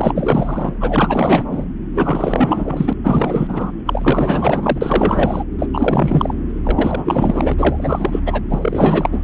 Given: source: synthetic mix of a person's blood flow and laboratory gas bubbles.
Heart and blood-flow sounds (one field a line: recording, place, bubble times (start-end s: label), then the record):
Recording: Doppler ultrasound of blood flow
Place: subclavian vein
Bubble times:
0.00-0.72 s: bubbles
0.80-1.43 s: bubbles
1.51-1.65 s: bubbles
1.94-2.93 s: bubbles
3.04-3.71 s: bubbles
3.86-4.79 s: bubbles
4.81-5.44 s: bubbles
5.58-5.69 s: bubbles
5.74-6.34 s: bubbles
6.63-7.54 s: bubbles
7.58-8.20 s: bubbles
8.26-8.43 s: bubbles
8.50-9.22 s: bubbles
From the record:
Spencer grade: 4 (maximum detectable bubble signal sounding continuously throughout systole and diastole of every cardiac period, and overriding the amplitude of the normal cardiac signals)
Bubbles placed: anywhere in the cardiac cycle